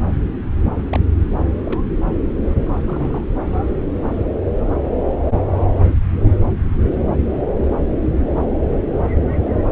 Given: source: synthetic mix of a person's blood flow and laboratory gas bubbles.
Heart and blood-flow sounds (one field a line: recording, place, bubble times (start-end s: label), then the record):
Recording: Doppler ultrasound of blood flow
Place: subclavian vein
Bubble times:
0.76-0.99 s: bubbles
1.65-1.81 s: bubbles
2.86-3.24 s: bubbles
From the record:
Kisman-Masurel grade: 121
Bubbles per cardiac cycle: 1 to 2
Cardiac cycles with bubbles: 10 to 50%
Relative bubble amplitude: barely perceptible (0.100 to 0.250)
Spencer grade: 2 (many but less than half of the cardiac periods contain bubble signals, singularly or in groups)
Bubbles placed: anywhere in the cardiac cycle